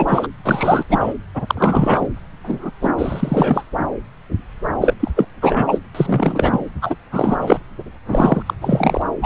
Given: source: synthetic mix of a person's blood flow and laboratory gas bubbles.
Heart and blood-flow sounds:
Doppler ultrasound of blood flow; subclavian vein
0.00-0.27 s: bubbles
0.43-0.84 s: bubbles
0.89-1.14 s: bubbles
1.35-2.07 s: bubbles
2.44-2.71 s: bubbles
2.81-2.92 s: bubbles
2.98-3.63 s: bubbles
4.80-4.94 s: bubbles
5.00-5.11 s: bubbles
5.15-5.25 s: bubbles
5.42-5.78 s: bubbles
5.94-6.63 s: bubbles
6.81-6.96 s: bubbles
7.11-7.60 s: bubbles
8.10-8.43 s: bubbles
8.46-8.54 s: bubbles
8.62-9.02 s: bubbles
9.21-9.25 s: bubbles
From the record:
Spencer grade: 3 (all of the cardiac periods contain showers or single bubble signals, but not dominating or overriding the cardiac motion signals); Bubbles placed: anywhere in the cardiac cycle

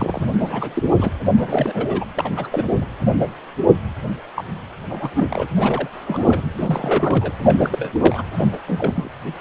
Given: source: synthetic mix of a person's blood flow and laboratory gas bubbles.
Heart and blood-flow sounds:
Doppler ultrasound of blood flow; precordium
0.00-0.24 s: bubbles
0.38-0.83 s: bubbles
0.97-1.12 s: bubbles
1.36-2.05 s: bubbles
2.17-2.31 s: bubbles
2.36-2.87 s: bubbles
4.35-4.44 s: bubbles
4.89-5.11 s: bubbles
5.15-5.27 s: bubbles
5.29-5.47 s: bubbles
5.59-5.89 s: bubbles
5.92-6.43 s: bubbles
6.57-7.33 s: bubbles
7.43-7.58 s: bubbles
7.60-8.23 s: bubbles
8.32-8.48 s: bubbles
8.52-8.58 s: bubbles
8.68-9.09 s: bubbles
From the record:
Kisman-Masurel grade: 332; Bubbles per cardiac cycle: rolling drumbeat, 9 or more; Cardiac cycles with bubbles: 50 to 99%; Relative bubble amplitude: moderate (0.250 to 0.450); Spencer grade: 3 (all of the cardiac periods contain showers or single bubble signals, but not dominating or overriding the cardiac motion signals); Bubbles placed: anywhere in the cardiac cycle

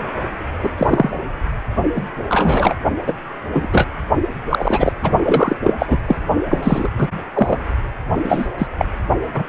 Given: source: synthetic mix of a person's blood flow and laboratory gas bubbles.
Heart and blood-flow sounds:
Doppler ultrasound of blood flow; precordium
0.63-0.69 s: bubbles
0.78-1.10 s: bubbles
1.95-2.04 s: bubbles
2.29-2.75 s: bubbles
3.06-3.13 s: bubbles
3.53-3.69 s: bubbles
3.72-3.89 s: bubbles
4.49-4.92 s: bubbles
5.03-5.11 s: bubbles
5.22-5.56 s: bubbles
5.63-5.74 s: bubbles
5.78-5.98 s: bubbles
6.07-6.18 s: bubbles
6.51-6.58 s: bubbles
6.62-6.88 s: bubbles
6.97-7.07 s: bubbles
7.34-7.57 s: bubbles
8.24-8.47 s: bubbles
8.58-8.67 s: bubbles
8.78-8.86 s: bubbles
9.33-9.43 s: bubbles
From the record:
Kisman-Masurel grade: 243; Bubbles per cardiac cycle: several, 3 to 8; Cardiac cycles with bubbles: 100%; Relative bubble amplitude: loud (0.450 to 0.775); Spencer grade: 3 (all of the cardiac periods contain showers or single bubble signals, but not dominating or overriding the cardiac motion signals); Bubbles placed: only in the low amplitude regions of the cardiac cycle

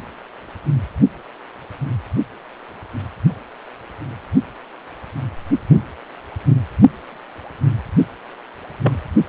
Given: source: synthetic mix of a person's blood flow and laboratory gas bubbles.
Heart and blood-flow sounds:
Doppler ultrasound of blood flow; precordium
8.83-8.93 s: bubbles
From the record:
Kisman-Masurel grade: 112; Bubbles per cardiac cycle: 1 to 2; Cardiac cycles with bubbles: 1 to 10%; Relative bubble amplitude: moderate (0.250 to 0.450); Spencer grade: 1 (occasional bubble signal discernible with the cardiac motion signal, with majority of cardiac periods free of bubbles); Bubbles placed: only in the low amplitude regions of the cardiac cycle

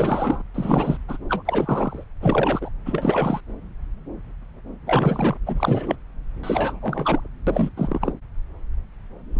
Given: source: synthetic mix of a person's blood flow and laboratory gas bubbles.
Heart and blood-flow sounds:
Doppler ultrasound of blood flow; subclavian vein
0.00-0.41 s: bubbles
0.54-0.97 s: bubbles
1.08-1.17 s: bubbles
1.30-1.43 s: bubbles
1.45-2.04 s: bubbles
2.21-2.69 s: bubbles
2.85-3.41 s: bubbles
4.87-5.38 s: bubbles
5.46-5.96 s: bubbles
6.43-6.79 s: bubbles
6.82-7.26 s: bubbles
7.46-7.69 s: bubbles
7.77-7.98 s: bubbles
8.01-8.12 s: bubbles
9.35-9.39 s: bubbles
From the record:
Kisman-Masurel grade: 332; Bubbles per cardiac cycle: rolling drumbeat, 9 or more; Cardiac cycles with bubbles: 50 to 99%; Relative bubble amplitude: moderate (0.250 to 0.450); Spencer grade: 3 (all of the cardiac periods contain showers or single bubble signals, but not dominating or overriding the cardiac motion signals); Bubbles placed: anywhere in the cardiac cycle

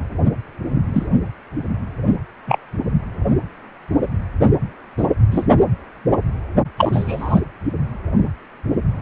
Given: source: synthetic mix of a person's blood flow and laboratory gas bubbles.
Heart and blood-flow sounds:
Doppler ultrasound of blood flow; precordium
0.94-1.08 s: bubbles
2.47-2.58 s: bubbles
4.97-5.04 s: bubbles
5.31-5.47 s: bubbles
6.77-7.40 s: bubbles
From the record:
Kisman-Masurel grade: 123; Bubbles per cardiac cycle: 1 to 2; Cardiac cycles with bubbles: 10 to 50%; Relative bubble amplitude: loud (0.450 to 0.775); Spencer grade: 2 (many but less than half of the cardiac periods contain bubble signals, singularly or in groups); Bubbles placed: anywhere in the cardiac cycle

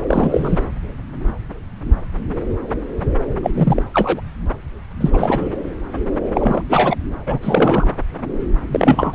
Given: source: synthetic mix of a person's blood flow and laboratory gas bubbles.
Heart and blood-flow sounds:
Doppler ultrasound of blood flow; subclavian vein
0.07-0.65 s: bubbles
3.43-3.51 s: bubbles
3.54-3.83 s: bubbles
3.93-4.21 s: bubbles
5.00-5.48 s: bubbles
6.34-6.62 s: bubbles
6.69-6.96 s: bubbles
7.26-7.38 s: bubbles
7.42-7.86 s: bubbles
8.73-9.15 s: bubbles
From the record:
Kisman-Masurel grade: 233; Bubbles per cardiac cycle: several, 3 to 8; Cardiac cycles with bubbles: 50 to 99%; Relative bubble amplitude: loud (0.450 to 0.775); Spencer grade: 3 (all of the cardiac periods contain showers or single bubble signals, but not dominating or overriding the cardiac motion signals); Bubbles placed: anywhere in the cardiac cycle

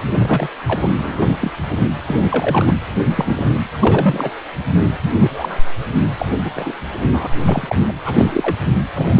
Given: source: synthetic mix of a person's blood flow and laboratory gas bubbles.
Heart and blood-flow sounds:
Doppler ultrasound of blood flow; precordium
0.11-0.48 s: bubbles
0.67-0.90 s: bubbles
0.98-1.52 s: bubbles
2.06-2.73 s: bubbles
3.09-3.50 s: bubbles
3.72-4.30 s: bubbles
4.78-4.85 s: bubbles
5.19-5.60 s: bubbles
6.18-6.26 s: bubbles
6.44-6.54 s: bubbles
6.56-6.71 s: bubbles
7.11-7.28 s: bubbles
7.44-7.75 s: bubbles
7.87-7.93 s: bubbles
8.05-8.15 s: bubbles
8.18-8.57 s: bubbles
8.96-9.20 s: bubbles
From the record:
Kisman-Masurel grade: 242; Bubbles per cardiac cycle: several, 3 to 8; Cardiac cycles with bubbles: 100%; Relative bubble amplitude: moderate (0.250 to 0.450); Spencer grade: 3 (all of the cardiac periods contain showers or single bubble signals, but not dominating or overriding the cardiac motion signals); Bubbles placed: anywhere in the cardiac cycle

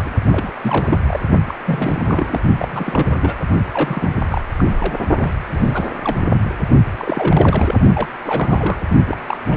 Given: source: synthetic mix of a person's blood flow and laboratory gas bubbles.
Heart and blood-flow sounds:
Doppler ultrasound of blood flow; precordium
0.00-0.03 s: bubbles
0.05-0.10 s: bubbles
0.31-0.54 s: bubbles
0.61-0.99 s: bubbles
1.08-1.20 s: bubbles
1.48-1.56 s: bubbles
1.66-2.39 s: bubbles
2.60-3.35 s: bubbles
3.73-4.09 s: bubbles
4.29-4.42 s: bubbles
4.58-4.99 s: bubbles
5.17-5.33 s: bubbles
5.53-5.90 s: bubbles
6.02-6.20 s: bubbles
6.98-7.79 s: bubbles
7.94-8.07 s: bubbles
8.26-8.81 s: bubbles
9.07-9.17 s: bubbles
9.27-9.37 s: bubbles
9.50-9.57 s: bubbles
From the record:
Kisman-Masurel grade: 342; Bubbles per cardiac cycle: rolling drumbeat, 9 or more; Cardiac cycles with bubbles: 100%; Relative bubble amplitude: moderate (0.250 to 0.450); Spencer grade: 3 (all of the cardiac periods contain showers or single bubble signals, but not dominating or overriding the cardiac motion signals); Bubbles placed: only in the low amplitude regions of the cardiac cycle

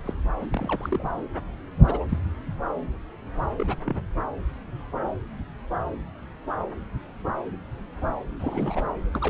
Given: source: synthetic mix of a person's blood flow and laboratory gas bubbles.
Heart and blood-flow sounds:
Doppler ultrasound of blood flow; subclavian vein
0.06-0.14 s: bubbles
0.40-0.48 s: bubbles
0.52-1.11 s: bubbles
1.83-2.06 s: bubbles
2.08-2.19 s: bubbles
3.56-3.76 s: bubbles
3.85-3.96 s: bubbles
8.39-8.89 s: bubbles
9.13-9.29 s: bubbles
From the record:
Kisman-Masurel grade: 221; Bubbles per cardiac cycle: several, 3 to 8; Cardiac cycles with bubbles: 10 to 50%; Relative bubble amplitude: barely perceptible (0.100 to 0.250); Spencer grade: 2 (many but less than half of the cardiac periods contain bubble signals, singularly or in groups); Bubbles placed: anywhere in the cardiac cycle

